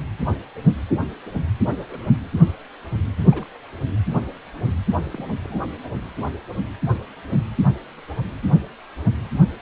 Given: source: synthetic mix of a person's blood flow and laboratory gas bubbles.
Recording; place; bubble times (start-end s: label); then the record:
Doppler ultrasound of blood flow; precordium
1.89-1.99 s: bubbles
3.32-3.57 s: bubbles
3.91-3.98 s: bubbles
5.06-5.09 s: bubbles
5.12-5.25 s: bubbles
5.28-5.59 s: bubbles
From the record:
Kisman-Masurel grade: 121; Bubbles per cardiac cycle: 1 to 2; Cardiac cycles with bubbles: 10 to 50%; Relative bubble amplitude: barely perceptible (0.100 to 0.250); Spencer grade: 2 (many but less than half of the cardiac periods contain bubble signals, singularly or in groups); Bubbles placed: anywhere in the cardiac cycle